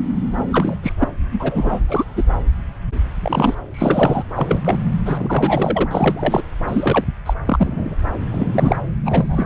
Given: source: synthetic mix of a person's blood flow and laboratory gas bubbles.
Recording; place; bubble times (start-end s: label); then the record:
Doppler ultrasound of blood flow; subclavian vein
0.51-0.75 s: bubbles
0.83-0.93 s: bubbles
0.99-1.08 s: bubbles
1.31-1.81 s: bubbles
1.88-2.04 s: bubbles
2.16-2.24 s: bubbles
3.20-3.55 s: bubbles
3.71-4.24 s: bubbles
4.33-4.62 s: bubbles
4.65-4.79 s: bubbles
5.05-6.42 s: bubbles
6.67-7.06 s: bubbles
7.25-7.33 s: bubbles
7.46-7.96 s: bubbles
8.32-8.76 s: bubbles
9.04-9.46 s: bubbles
From the record:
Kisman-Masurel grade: 233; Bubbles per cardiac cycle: several, 3 to 8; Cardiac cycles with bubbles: 50 to 99%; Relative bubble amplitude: loud (0.450 to 0.775); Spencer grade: 3 (all of the cardiac periods contain showers or single bubble signals, but not dominating or overriding the cardiac motion signals); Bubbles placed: anywhere in the cardiac cycle